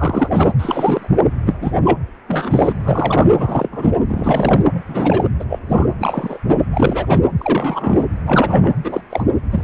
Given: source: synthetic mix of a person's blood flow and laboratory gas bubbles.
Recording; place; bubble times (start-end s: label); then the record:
Doppler ultrasound of blood flow; precordium
0.00-0.29 s: bubbles
0.32-0.52 s: bubbles
0.59-1.10 s: bubbles
1.46-1.53 s: bubbles
1.61-1.73 s: bubbles
1.84-1.98 s: bubbles
2.28-2.72 s: bubbles
2.84-3.28 s: bubbles
3.38-3.68 s: bubbles
3.71-3.91 s: bubbles
4.08-4.62 s: bubbles
4.74-4.82 s: bubbles
4.88-5.24 s: bubbles
5.40-5.44 s: bubbles
5.49-5.59 s: bubbles
5.69-5.87 s: bubbles
5.99-6.39 s: bubbles
6.49-6.56 s: bubbles
6.73-7.19 s: bubbles
7.39-8.05 s: bubbles
8.26-8.72 s: bubbles
8.84-9.02 s: bubbles
9.11-9.25 s: bubbles
9.52-9.63 s: bubbles
From the record:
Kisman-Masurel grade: 242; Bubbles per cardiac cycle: several, 3 to 8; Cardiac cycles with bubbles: 100%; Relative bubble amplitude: moderate (0.250 to 0.450); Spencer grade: 3 (all of the cardiac periods contain showers or single bubble signals, but not dominating or overriding the cardiac motion signals); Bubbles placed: anywhere in the cardiac cycle